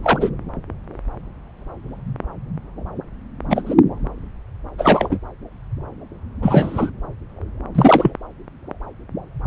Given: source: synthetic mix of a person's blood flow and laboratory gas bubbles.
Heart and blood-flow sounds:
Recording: Doppler ultrasound of blood flow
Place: subclavian vein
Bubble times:
0.00-0.29 s: bubbles
3.50-3.62 s: bubbles
3.65-3.75 s: bubbles
4.78-5.19 s: bubbles
6.42-6.90 s: bubbles
7.75-8.11 s: bubbles
From the record:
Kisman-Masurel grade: 223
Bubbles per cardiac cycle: several, 3 to 8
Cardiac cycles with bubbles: 10 to 50%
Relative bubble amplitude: loud (0.450 to 0.775)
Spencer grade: 2 (many but less than half of the cardiac periods contain bubble signals, singularly or in groups)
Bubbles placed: anywhere in the cardiac cycle

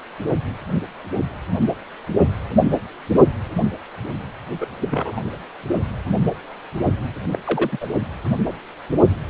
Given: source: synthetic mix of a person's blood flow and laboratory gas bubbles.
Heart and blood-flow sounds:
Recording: Doppler ultrasound of blood flow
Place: precordium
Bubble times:
4.61-4.66 s: bubbles
4.81-5.22 s: bubbles
7.33-7.38 s: bubbles
7.44-7.78 s: bubbles
7.81-7.87 s: bubbles
From the record:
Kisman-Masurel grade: 222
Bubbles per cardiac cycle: several, 3 to 8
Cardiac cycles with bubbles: 10 to 50%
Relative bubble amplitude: moderate (0.250 to 0.450)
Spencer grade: 2 (many but less than half of the cardiac periods contain bubble signals, singularly or in groups)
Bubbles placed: only in the low amplitude regions of the cardiac cycle

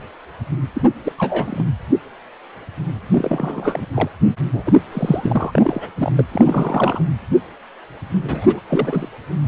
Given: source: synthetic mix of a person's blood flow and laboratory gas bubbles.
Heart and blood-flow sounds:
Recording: Doppler ultrasound of blood flow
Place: precordium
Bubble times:
0.74-0.81 s: bubbles
1.03-1.12 s: bubbles
1.18-1.65 s: bubbles
3.10-3.86 s: bubbles
3.94-4.09 s: bubbles
4.53-4.72 s: bubbles
4.92-5.90 s: bubbles
5.98-6.12 s: bubbles
6.17-6.25 s: bubbles
6.32-7.02 s: bubbles
8.24-8.60 s: bubbles
8.70-9.08 s: bubbles
From the record:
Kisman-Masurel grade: 332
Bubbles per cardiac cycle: rolling drumbeat, 9 or more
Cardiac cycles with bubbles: 50 to 99%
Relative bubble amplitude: moderate (0.250 to 0.450)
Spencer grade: 3 (all of the cardiac periods contain showers or single bubble signals, but not dominating or overriding the cardiac motion signals)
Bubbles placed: anywhere in the cardiac cycle

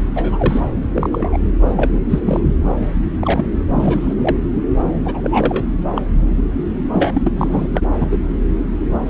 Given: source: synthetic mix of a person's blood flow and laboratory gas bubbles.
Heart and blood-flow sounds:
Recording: Doppler ultrasound of blood flow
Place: subclavian vein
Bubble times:
0.16-0.60 s: bubbles
0.94-1.09 s: bubbles
1.12-1.38 s: bubbles
1.61-1.90 s: bubbles
1.93-1.99 s: bubbles
2.09-2.57 s: bubbles
2.70-2.75 s: bubbles
3.21-3.46 s: bubbles
3.71-4.14 s: bubbles
4.21-4.37 s: bubbles
5.04-5.65 s: bubbles
5.95-6.02 s: bubbles
6.93-7.32 s: bubbles
7.35-7.81 s: bubbles
8.00-8.06 s: bubbles
8.11-8.19 s: bubbles
9.06-9.10 s: bubbles
From the record:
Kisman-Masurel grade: 242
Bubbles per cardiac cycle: several, 3 to 8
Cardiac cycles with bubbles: 100%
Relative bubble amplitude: moderate (0.250 to 0.450)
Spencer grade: 3 (all of the cardiac periods contain showers or single bubble signals, but not dominating or overriding the cardiac motion signals)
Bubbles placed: anywhere in the cardiac cycle

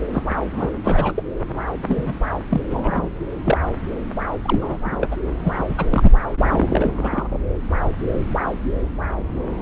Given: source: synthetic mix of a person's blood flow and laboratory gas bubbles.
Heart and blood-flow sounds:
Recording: Doppler ultrasound of blood flow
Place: subclavian vein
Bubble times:
0.12-0.23 s: bubbles
0.52-0.69 s: bubbles
0.84-1.12 s: bubbles
1.16-1.23 s: bubbles
1.86-2.04 s: bubbles
2.06-2.16 s: bubbles
2.50-2.61 s: bubbles
2.70-3.08 s: bubbles
3.45-3.58 s: bubbles
4.44-4.78 s: bubbles
4.84-5.17 s: bubbles
5.44-5.65 s: bubbles
5.68-5.86 s: bubbles
5.90-6.12 s: bubbles
6.50-7.28 s: bubbles
From the record:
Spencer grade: 3 (all of the cardiac periods contain showers or single bubble signals, but not dominating or overriding the cardiac motion signals)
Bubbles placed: anywhere in the cardiac cycle

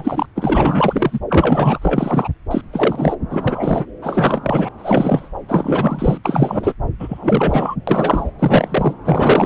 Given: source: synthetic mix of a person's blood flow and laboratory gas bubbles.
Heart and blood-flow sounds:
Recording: Doppler ultrasound of blood flow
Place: subclavian vein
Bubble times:
0.00-0.26 s: bubbles
0.35-1.18 s: bubbles
1.30-1.79 s: bubbles
1.82-2.28 s: bubbles
2.50-2.61 s: bubbles
2.73-3.16 s: bubbles
3.30-3.86 s: bubbles
4.01-4.69 s: bubbles
4.78-5.28 s: bubbles
5.48-6.18 s: bubbles
6.24-6.74 s: bubbles
7.00-7.75 s: bubbles
7.87-8.30 s: bubbles
8.39-8.94 s: bubbles
9.05-9.45 s: bubbles
From the record:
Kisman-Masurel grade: 343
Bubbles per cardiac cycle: rolling drumbeat, 9 or more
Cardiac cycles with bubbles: 100%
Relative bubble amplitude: loud (0.450 to 0.775)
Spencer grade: 3 (all of the cardiac periods contain showers or single bubble signals, but not dominating or overriding the cardiac motion signals)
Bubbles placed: anywhere in the cardiac cycle

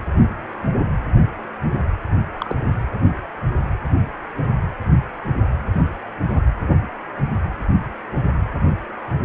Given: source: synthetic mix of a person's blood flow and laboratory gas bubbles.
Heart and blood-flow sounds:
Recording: Doppler ultrasound of blood flow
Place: precordium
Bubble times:
2.38-2.55 s: bubbles
From the record:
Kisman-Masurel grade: 112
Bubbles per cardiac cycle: 1 to 2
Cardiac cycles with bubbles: 1 to 10%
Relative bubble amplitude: moderate (0.250 to 0.450)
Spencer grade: 1 (occasional bubble signal discernible with the cardiac motion signal, with majority of cardiac periods free of bubbles)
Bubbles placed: anywhere in the cardiac cycle

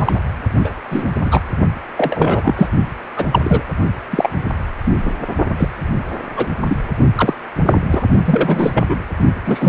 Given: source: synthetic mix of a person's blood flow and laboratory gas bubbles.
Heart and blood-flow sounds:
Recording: Doppler ultrasound of blood flow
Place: precordium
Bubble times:
0.00-0.21 s: bubbles
0.59-0.74 s: bubbles
0.90-1.12 s: bubbles
1.25-1.41 s: bubbles
1.97-2.70 s: bubbles
3.16-3.25 s: bubbles
3.32-3.62 s: bubbles
4.11-4.29 s: bubbles
4.84-4.95 s: bubbles
5.03-5.12 s: bubbles
5.58-5.69 s: bubbles
6.36-6.48 s: bubbles
6.69-6.78 s: bubbles
7.15-7.33 s: bubbles
7.65-7.83 s: bubbles
7.86-8.04 s: bubbles
8.25-8.95 s: bubbles
9.45-9.69 s: bubbles
From the record:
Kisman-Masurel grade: 243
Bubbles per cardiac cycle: several, 3 to 8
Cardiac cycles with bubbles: 100%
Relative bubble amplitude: loud (0.450 to 0.775)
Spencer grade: 3 (all of the cardiac periods contain showers or single bubble signals, but not dominating or overriding the cardiac motion signals)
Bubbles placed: only in the low amplitude regions of the cardiac cycle

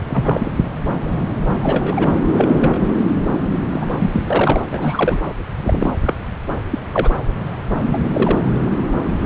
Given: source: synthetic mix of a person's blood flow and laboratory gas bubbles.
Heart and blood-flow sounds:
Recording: Doppler ultrasound of blood flow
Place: subclavian vein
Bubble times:
0.09-0.50 s: bubbles
1.58-2.14 s: bubbles
2.37-2.80 s: bubbles
3.71-3.86 s: bubbles
3.99-4.21 s: bubbles
4.30-4.61 s: bubbles
4.71-5.20 s: bubbles
5.62-5.94 s: bubbles
6.03-6.14 s: bubbles
6.70-6.79 s: bubbles
6.92-7.13 s: bubbles
7.93-7.98 s: bubbles
8.13-8.39 s: bubbles
From the record:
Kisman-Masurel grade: 232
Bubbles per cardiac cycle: several, 3 to 8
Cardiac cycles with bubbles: 50 to 99%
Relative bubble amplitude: moderate (0.250 to 0.450)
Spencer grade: 3 (all of the cardiac periods contain showers or single bubble signals, but not dominating or overriding the cardiac motion signals)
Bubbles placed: anywhere in the cardiac cycle

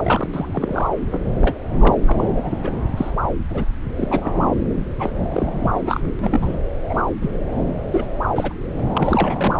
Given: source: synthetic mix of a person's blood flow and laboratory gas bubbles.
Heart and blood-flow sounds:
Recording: Doppler ultrasound of blood flow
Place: subclavian vein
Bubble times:
0.00-0.29 s: bubbles
0.34-0.89 s: bubbles
1.11-1.19 s: bubbles
1.40-1.57 s: bubbles
1.73-1.77 s: bubbles
1.79-1.95 s: bubbles
2.07-2.27 s: bubbles
2.35-2.58 s: bubbles
2.63-2.72 s: bubbles
2.97-3.10 s: bubbles
3.49-3.65 s: bubbles
3.96-4.55 s: bubbles
4.99-5.12 s: bubbles
5.26-6.00 s: bubbles
6.19-6.57 s: bubbles
6.89-7.02 s: bubbles
7.21-7.31 s: bubbles
7.91-8.06 s: bubbles
8.35-8.53 s: bubbles
8.94-9.55 s: bubbles
From the record:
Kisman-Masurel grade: 242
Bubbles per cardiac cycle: several, 3 to 8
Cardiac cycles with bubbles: 100%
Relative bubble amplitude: moderate (0.250 to 0.450)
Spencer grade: 3 (all of the cardiac periods contain showers or single bubble signals, but not dominating or overriding the cardiac motion signals)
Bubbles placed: anywhere in the cardiac cycle

